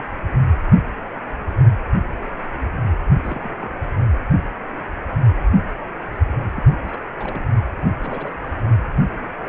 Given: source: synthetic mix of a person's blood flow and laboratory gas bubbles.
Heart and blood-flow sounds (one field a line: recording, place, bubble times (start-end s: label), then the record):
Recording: Doppler ultrasound of blood flow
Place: precordium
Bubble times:
3.24-3.49 s: bubbles
3.58-3.74 s: bubbles
6.56-6.63 s: bubbles
6.88-6.98 s: bubbles
7.18-7.44 s: bubbles
7.99-8.34 s: bubbles
8.42-8.51 s: bubbles
From the record:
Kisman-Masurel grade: 221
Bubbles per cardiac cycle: several, 3 to 8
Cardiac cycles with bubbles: 10 to 50%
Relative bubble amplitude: barely perceptible (0.100 to 0.250)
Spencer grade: 2 (many but less than half of the cardiac periods contain bubble signals, singularly or in groups)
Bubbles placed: anywhere in the cardiac cycle